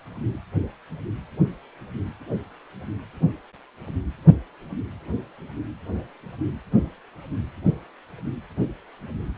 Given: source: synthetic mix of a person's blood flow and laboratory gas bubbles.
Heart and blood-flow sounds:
Doppler ultrasound of blood flow; precordium
no bubbles
From the record:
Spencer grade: 0 (complete lack of bubble signals)

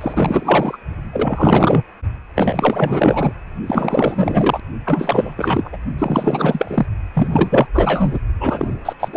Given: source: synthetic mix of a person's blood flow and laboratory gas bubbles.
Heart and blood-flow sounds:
Doppler ultrasound of blood flow; precordium
0.01-0.77 s: bubbles
1.12-1.83 s: bubbles
2.36-3.33 s: bubbles
3.66-4.60 s: bubbles
4.85-5.69 s: bubbles
5.72-5.77 s: bubbles
5.98-6.86 s: bubbles
7.14-7.66 s: bubbles
7.73-8.19 s: bubbles
8.39-8.73 s: bubbles
8.85-8.93 s: bubbles
8.99-9.17 s: bubbles
From the record:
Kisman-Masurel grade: 444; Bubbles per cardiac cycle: continuous sound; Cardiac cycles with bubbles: 100%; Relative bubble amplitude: maximal (0.775 to 0.999); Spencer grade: 4 (maximum detectable bubble signal sounding continuously throughout systole and diastole of every cardiac period, and overriding the amplitude of the normal cardiac signals); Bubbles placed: only in the low amplitude regions of the cardiac cycle

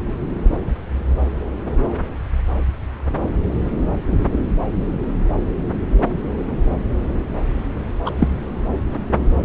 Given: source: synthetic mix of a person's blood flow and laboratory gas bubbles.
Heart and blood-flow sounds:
Doppler ultrasound of blood flow; subclavian vein
8.05-8.10 s: bubbles
8.18-8.28 s: bubbles
From the record:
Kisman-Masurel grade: 113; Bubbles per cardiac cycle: 1 to 2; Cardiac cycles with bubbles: 1 to 10%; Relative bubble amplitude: loud (0.450 to 0.775); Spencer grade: 1 (occasional bubble signal discernible with the cardiac motion signal, with majority of cardiac periods free of bubbles); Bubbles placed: anywhere in the cardiac cycle

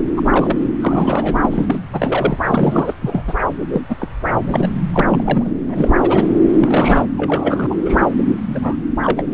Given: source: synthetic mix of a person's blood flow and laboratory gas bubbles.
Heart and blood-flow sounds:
Doppler ultrasound of blood flow; subclavian vein
0.00-0.04 s: bubbles
0.16-0.22 s: bubbles
0.25-0.58 s: bubbles
0.80-1.39 s: bubbles
1.42-1.78 s: bubbles
1.93-2.38 s: bubbles
2.45-2.95 s: bubbles
3.01-3.23 s: bubbles
3.27-3.34 s: bubbles
3.72-3.81 s: bubbles
3.88-3.96 s: bubbles
4.00-4.08 s: bubbles
4.45-4.69 s: bubbles
4.94-5.52 s: bubbles
5.69-5.91 s: bubbles
6.00-6.30 s: bubbles
6.58-7.06 s: bubbles
7.17-7.67 s: bubbles
7.70-7.76 s: bubbles
7.79-8.09 s: bubbles
8.44-8.77 s: bubbles
9.03-9.26 s: bubbles
From the record:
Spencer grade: 3 (all of the cardiac periods contain showers or single bubble signals, but not dominating or overriding the cardiac motion signals); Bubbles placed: anywhere in the cardiac cycle

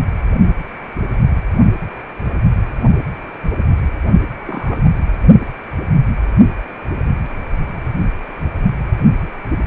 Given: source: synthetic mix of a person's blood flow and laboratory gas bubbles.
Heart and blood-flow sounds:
Doppler ultrasound of blood flow; precordium
4.47-4.79 s: bubbles
4.83-4.89 s: bubbles
From the record:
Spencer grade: 2 (many but less than half of the cardiac periods contain bubble signals, singularly or in groups); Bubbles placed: only in the low amplitude regions of the cardiac cycle

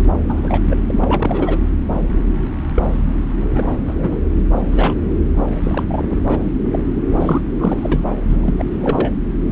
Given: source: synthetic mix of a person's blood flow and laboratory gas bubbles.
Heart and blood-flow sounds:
Doppler ultrasound of blood flow; subclavian vein
0.28-0.60 s: bubbles
0.65-0.77 s: bubbles
0.86-1.58 s: bubbles
1.93-2.12 s: bubbles
2.75-2.98 s: bubbles
3.52-3.77 s: bubbles
3.86-3.94 s: bubbles
3.98-4.17 s: bubbles
4.71-4.94 s: bubbles
5.63-6.07 s: bubbles
6.10-6.42 s: bubbles
6.72-6.82 s: bubbles
7.10-7.42 s: bubbles
7.54-8.13 s: bubbles
8.29-8.37 s: bubbles
8.43-8.55 s: bubbles
8.59-8.65 s: bubbles
8.80-9.12 s: bubbles
From the record:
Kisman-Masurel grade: 242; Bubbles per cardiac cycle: several, 3 to 8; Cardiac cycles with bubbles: 100%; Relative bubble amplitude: moderate (0.250 to 0.450); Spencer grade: 3 (all of the cardiac periods contain showers or single bubble signals, but not dominating or overriding the cardiac motion signals); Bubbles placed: anywhere in the cardiac cycle

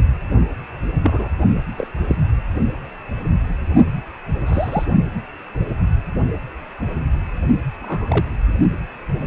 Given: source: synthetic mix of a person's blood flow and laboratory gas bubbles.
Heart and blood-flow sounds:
Doppler ultrasound of blood flow; precordium
1.02-1.29 s: bubbles
1.78-1.87 s: bubbles
2.08-2.16 s: bubbles
4.46-4.86 s: bubbles
7.80-8.25 s: bubbles
From the record:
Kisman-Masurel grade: 122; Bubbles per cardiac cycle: 1 to 2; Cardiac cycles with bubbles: 10 to 50%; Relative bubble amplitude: moderate (0.250 to 0.450); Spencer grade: 2 (many but less than half of the cardiac periods contain bubble signals, singularly or in groups); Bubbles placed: only in the low amplitude regions of the cardiac cycle

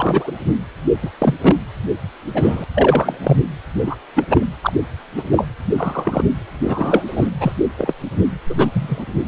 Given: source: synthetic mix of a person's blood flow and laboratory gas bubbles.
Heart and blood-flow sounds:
Doppler ultrasound of blood flow; precordium
0.00-0.32 s: bubbles
1.02-1.10 s: bubbles
1.18-1.35 s: bubbles
1.42-1.55 s: bubbles
2.33-2.64 s: bubbles
2.75-3.18 s: bubbles
3.23-3.37 s: bubbles
3.86-3.96 s: bubbles
4.15-4.25 s: bubbles
4.29-4.45 s: bubbles
4.61-4.72 s: bubbles
5.17-5.22 s: bubbles
5.30-5.47 s: bubbles
5.77-6.24 s: bubbles
6.64-7.30 s: bubbles
7.40-7.52 s: bubbles
7.77-7.94 s: bubbles
8.49-8.71 s: bubbles
8.73-9.04 s: bubbles
From the record:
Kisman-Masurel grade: 243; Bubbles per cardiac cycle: several, 3 to 8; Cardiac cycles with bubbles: 100%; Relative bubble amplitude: loud (0.450 to 0.775); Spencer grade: 3 (all of the cardiac periods contain showers or single bubble signals, but not dominating or overriding the cardiac motion signals); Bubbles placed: anywhere in the cardiac cycle

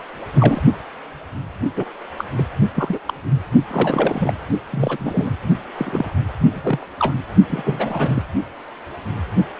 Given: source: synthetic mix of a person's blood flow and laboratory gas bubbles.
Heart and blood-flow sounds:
Doppler ultrasound of blood flow; precordium
0.00-0.03 s: bubbles
0.35-0.62 s: bubbles
1.77-1.84 s: bubbles
2.18-2.24 s: bubbles
2.37-2.46 s: bubbles
2.75-2.99 s: bubbles
3.06-3.14 s: bubbles
3.70-4.33 s: bubbles
4.71-5.30 s: bubbles
5.77-6.10 s: bubbles
6.50-6.84 s: bubbles
6.99-7.14 s: bubbles
7.49-8.22 s: bubbles
From the record:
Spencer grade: 3 (all of the cardiac periods contain showers or single bubble signals, but not dominating or overriding the cardiac motion signals); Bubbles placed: only in the low amplitude regions of the cardiac cycle

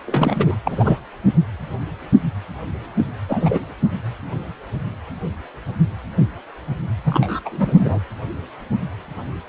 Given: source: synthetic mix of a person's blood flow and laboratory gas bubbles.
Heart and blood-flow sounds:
Doppler ultrasound of blood flow; precordium
0.07-0.55 s: bubbles
0.64-0.98 s: bubbles
2.96-3.04 s: bubbles
3.29-3.59 s: bubbles
7.05-7.40 s: bubbles
7.45-8.00 s: bubbles
From the record:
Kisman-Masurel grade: 222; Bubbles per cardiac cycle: several, 3 to 8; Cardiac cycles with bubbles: 10 to 50%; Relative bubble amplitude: moderate (0.250 to 0.450); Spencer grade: 2 (many but less than half of the cardiac periods contain bubble signals, singularly or in groups); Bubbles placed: anywhere in the cardiac cycle

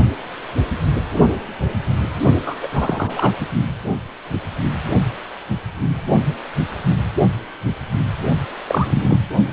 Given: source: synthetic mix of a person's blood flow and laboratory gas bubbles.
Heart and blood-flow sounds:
Doppler ultrasound of blood flow; precordium
2.46-2.55 s: bubbles
2.62-2.67 s: bubbles
2.74-3.32 s: bubbles
3.40-3.46 s: bubbles
8.69-9.17 s: bubbles
From the record:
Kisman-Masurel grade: 222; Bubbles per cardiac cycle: several, 3 to 8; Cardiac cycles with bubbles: 10 to 50%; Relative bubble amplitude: moderate (0.250 to 0.450); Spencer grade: 2 (many but less than half of the cardiac periods contain bubble signals, singularly or in groups); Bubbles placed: only in the low amplitude regions of the cardiac cycle

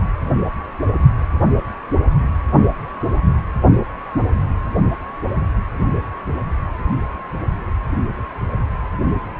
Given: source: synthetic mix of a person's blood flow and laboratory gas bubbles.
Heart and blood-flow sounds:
Doppler ultrasound of blood flow; precordium
no bubbles
From the record:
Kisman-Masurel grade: 000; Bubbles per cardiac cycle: 0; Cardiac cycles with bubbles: 0%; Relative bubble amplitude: no bubbles discernible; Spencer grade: 0 (complete lack of bubble signals)

